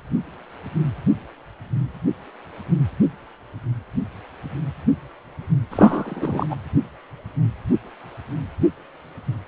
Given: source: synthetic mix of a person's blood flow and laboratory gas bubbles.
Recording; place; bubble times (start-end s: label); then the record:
Doppler ultrasound of blood flow; precordium
5.71-6.46 s: bubbles
6.50-6.56 s: bubbles
From the record:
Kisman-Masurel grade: 213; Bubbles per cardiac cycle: several, 3 to 8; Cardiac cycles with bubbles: 1 to 10%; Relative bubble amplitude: loud (0.450 to 0.775); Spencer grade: 1 (occasional bubble signal discernible with the cardiac motion signal, with majority of cardiac periods free of bubbles); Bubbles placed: anywhere in the cardiac cycle